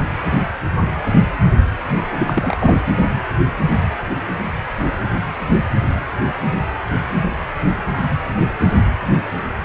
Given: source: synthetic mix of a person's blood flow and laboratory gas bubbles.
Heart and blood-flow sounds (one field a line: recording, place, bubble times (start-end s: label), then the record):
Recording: Doppler ultrasound of blood flow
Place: precordium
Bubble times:
2.19-2.82 s: bubbles
From the record:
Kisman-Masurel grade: 212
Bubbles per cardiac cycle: several, 3 to 8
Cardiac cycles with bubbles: 1 to 10%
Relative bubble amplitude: moderate (0.250 to 0.450)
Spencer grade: 1 (occasional bubble signal discernible with the cardiac motion signal, with majority of cardiac periods free of bubbles)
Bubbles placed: anywhere in the cardiac cycle